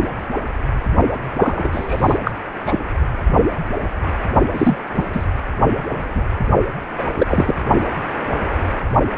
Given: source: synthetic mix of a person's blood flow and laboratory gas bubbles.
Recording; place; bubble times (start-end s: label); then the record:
Doppler ultrasound of blood flow; precordium
1.11-1.17 s: bubbles
1.36-2.19 s: bubbles
2.25-2.31 s: bubbles
2.62-2.79 s: bubbles
4.54-4.77 s: bubbles
4.95-5.04 s: bubbles
5.12-5.25 s: bubbles
5.76-6.22 s: bubbles
6.99-7.04 s: bubbles
7.14-7.55 s: bubbles
From the record:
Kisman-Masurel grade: 223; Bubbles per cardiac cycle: several, 3 to 8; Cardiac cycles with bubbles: 10 to 50%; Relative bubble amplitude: loud (0.450 to 0.775); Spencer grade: 2 (many but less than half of the cardiac periods contain bubble signals, singularly or in groups); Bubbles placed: only in the low amplitude regions of the cardiac cycle